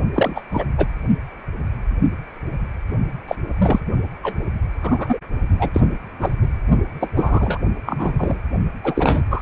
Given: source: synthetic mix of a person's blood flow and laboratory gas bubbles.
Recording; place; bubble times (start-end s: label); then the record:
Doppler ultrasound of blood flow; precordium
0.14-0.41 s: bubbles
0.51-0.65 s: bubbles
0.77-0.86 s: bubbles
3.27-3.35 s: bubbles
3.58-3.79 s: bubbles
4.23-4.35 s: bubbles
4.83-5.17 s: bubbles
5.59-5.71 s: bubbles
5.73-5.81 s: bubbles
6.19-6.34 s: bubbles
7.00-7.09 s: bubbles
7.16-7.58 s: bubbles
7.85-8.37 s: bubbles
8.84-9.23 s: bubbles
9.29-9.42 s: bubbles
From the record:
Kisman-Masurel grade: 233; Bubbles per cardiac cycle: several, 3 to 8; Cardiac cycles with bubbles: 50 to 99%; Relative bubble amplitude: loud (0.450 to 0.775); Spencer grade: 3 (all of the cardiac periods contain showers or single bubble signals, but not dominating or overriding the cardiac motion signals); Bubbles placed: only in the low amplitude regions of the cardiac cycle